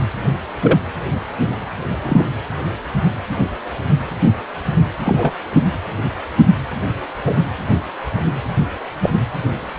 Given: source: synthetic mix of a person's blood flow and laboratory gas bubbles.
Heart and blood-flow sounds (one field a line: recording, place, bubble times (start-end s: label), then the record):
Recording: Doppler ultrasound of blood flow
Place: precordium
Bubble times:
0.62-0.79 s: bubbles
2.02-2.26 s: bubbles
5.05-5.34 s: bubbles
7.25-7.38 s: bubbles
9.02-9.10 s: bubbles
From the record:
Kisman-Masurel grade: 123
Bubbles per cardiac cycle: 1 to 2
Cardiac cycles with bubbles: 10 to 50%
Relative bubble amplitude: loud (0.450 to 0.775)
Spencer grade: 2 (many but less than half of the cardiac periods contain bubble signals, singularly or in groups)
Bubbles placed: anywhere in the cardiac cycle